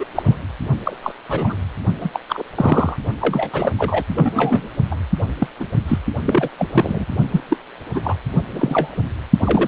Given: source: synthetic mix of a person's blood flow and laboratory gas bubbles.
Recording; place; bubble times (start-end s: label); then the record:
Doppler ultrasound of blood flow; precordium
0.00-0.05 s: bubbles
0.14-0.22 s: bubbles
0.25-0.36 s: bubbles
0.84-0.97 s: bubbles
1.02-1.12 s: bubbles
1.28-1.56 s: bubbles
2.00-2.10 s: bubbles
2.13-2.19 s: bubbles
2.29-2.42 s: bubbles
2.55-2.96 s: bubbles
3.21-3.72 s: bubbles
3.78-4.03 s: bubbles
4.14-4.70 s: bubbles
4.91-4.96 s: bubbles
5.39-5.47 s: bubbles
5.60-5.68 s: bubbles
5.88-5.98 s: bubbles
6.24-6.48 s: bubbles
6.58-6.66 s: bubbles
6.72-7.04 s: bubbles
7.30-7.40 s: bubbles
7.48-7.57 s: bubbles
7.93-8.16 s: bubbles
8.53-9.03 s: bubbles
9.39-9.67 s: bubbles
From the record:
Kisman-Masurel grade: 242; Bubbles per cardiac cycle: several, 3 to 8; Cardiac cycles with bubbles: 100%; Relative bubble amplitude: moderate (0.250 to 0.450); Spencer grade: 3 (all of the cardiac periods contain showers or single bubble signals, but not dominating or overriding the cardiac motion signals); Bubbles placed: only in the low amplitude regions of the cardiac cycle